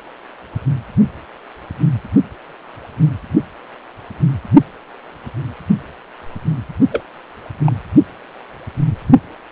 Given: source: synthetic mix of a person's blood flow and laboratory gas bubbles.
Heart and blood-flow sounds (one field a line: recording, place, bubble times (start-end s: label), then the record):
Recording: Doppler ultrasound of blood flow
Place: precordium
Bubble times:
6.92-7.06 s: bubbles
7.66-7.72 s: bubbles
From the record:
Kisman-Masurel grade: 112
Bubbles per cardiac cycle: 1 to 2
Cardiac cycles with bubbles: 1 to 10%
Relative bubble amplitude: moderate (0.250 to 0.450)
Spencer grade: 1 (occasional bubble signal discernible with the cardiac motion signal, with majority of cardiac periods free of bubbles)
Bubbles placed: anywhere in the cardiac cycle